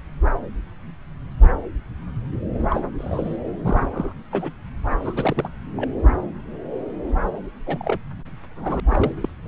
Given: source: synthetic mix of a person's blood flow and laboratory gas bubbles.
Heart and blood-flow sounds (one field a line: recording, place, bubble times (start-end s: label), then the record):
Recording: Doppler ultrasound of blood flow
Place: subclavian vein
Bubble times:
2.54-2.58 s: bubbles
2.70-2.81 s: bubbles
2.98-3.37 s: bubbles
3.65-4.13 s: bubbles
4.31-4.51 s: bubbles
4.92-4.96 s: bubbles
5.00-5.48 s: bubbles
5.75-5.88 s: bubbles
7.66-8.00 s: bubbles
8.56-8.80 s: bubbles
8.89-9.12 s: bubbles
9.22-9.29 s: bubbles
From the record:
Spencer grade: 2 (many but less than half of the cardiac periods contain bubble signals, singularly or in groups)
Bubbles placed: anywhere in the cardiac cycle